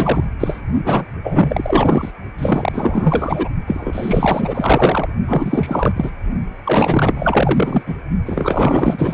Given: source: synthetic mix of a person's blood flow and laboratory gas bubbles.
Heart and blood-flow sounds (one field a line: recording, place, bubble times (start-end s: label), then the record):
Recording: Doppler ultrasound of blood flow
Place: precordium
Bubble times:
0.00-0.24 s: bubbles
0.40-0.62 s: bubbles
0.84-1.06 s: bubbles
1.24-2.12 s: bubbles
2.38-3.48 s: bubbles
3.66-5.08 s: bubbles
5.25-5.94 s: bubbles
5.96-6.11 s: bubbles
6.64-7.96 s: bubbles
8.26-9.14 s: bubbles
From the record:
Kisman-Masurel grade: 444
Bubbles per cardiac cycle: continuous sound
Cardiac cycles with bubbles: 100%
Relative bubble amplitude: maximal (0.775 to 0.999)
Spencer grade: 4 (maximum detectable bubble signal sounding continuously throughout systole and diastole of every cardiac period, and overriding the amplitude of the normal cardiac signals)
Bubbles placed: only in the low amplitude regions of the cardiac cycle